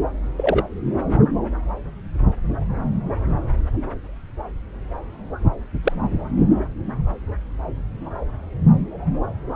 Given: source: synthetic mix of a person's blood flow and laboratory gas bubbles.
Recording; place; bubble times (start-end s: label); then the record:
Doppler ultrasound of blood flow; subclavian vein
0.36-0.64 s: bubbles
5.83-5.92 s: bubbles
From the record:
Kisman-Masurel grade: 122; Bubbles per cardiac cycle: 1 to 2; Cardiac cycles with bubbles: 10 to 50%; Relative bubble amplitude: moderate (0.250 to 0.450); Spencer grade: 2 (many but less than half of the cardiac periods contain bubble signals, singularly or in groups); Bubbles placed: anywhere in the cardiac cycle